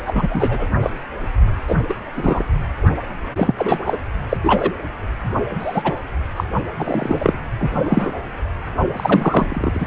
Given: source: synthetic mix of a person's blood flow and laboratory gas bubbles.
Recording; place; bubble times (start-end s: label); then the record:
Doppler ultrasound of blood flow; precordium
0.06-0.27 s: bubbles
0.30-0.67 s: bubbles
0.81-0.91 s: bubbles
1.68-1.75 s: bubbles
1.89-1.94 s: bubbles
2.15-2.44 s: bubbles
3.35-3.55 s: bubbles
3.58-3.97 s: bubbles
4.29-4.37 s: bubbles
4.43-4.72 s: bubbles
5.59-5.93 s: bubbles
6.36-6.44 s: bubbles
6.78-7.38 s: bubbles
7.60-7.70 s: bubbles
7.84-8.12 s: bubbles
8.96-9.86 s: bubbles
From the record:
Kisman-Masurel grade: 243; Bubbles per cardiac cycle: several, 3 to 8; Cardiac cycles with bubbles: 100%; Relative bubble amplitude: loud (0.450 to 0.775); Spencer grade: 3 (all of the cardiac periods contain showers or single bubble signals, but not dominating or overriding the cardiac motion signals); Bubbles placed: only in the low amplitude regions of the cardiac cycle